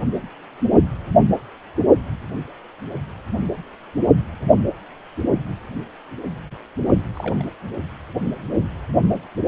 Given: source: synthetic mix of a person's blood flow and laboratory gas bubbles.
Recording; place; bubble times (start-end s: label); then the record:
Doppler ultrasound of blood flow; precordium
7.13-7.45 s: bubbles
8.96-9.09 s: bubbles
From the record:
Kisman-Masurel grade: 121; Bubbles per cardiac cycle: 1 to 2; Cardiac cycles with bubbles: 10 to 50%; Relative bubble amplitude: barely perceptible (0.100 to 0.250); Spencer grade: 2 (many but less than half of the cardiac periods contain bubble signals, singularly or in groups); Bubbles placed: only in the low amplitude regions of the cardiac cycle